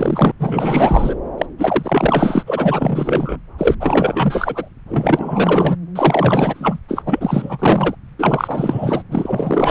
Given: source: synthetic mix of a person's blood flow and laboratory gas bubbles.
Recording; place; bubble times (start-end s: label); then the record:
Doppler ultrasound of blood flow; subclavian vein
0.00-0.32 s: bubbles
0.39-1.16 s: bubbles
1.38-1.46 s: bubbles
1.58-2.43 s: bubbles
2.46-3.38 s: bubbles
3.58-3.75 s: bubbles
3.79-4.69 s: bubbles
4.89-5.76 s: bubbles
5.95-6.80 s: bubbles
6.88-7.02 s: bubbles
7.05-7.95 s: bubbles
8.19-9.03 s: bubbles
9.11-9.71 s: bubbles
From the record:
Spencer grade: 4 (maximum detectable bubble signal sounding continuously throughout systole and diastole of every cardiac period, and overriding the amplitude of the normal cardiac signals); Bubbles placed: anywhere in the cardiac cycle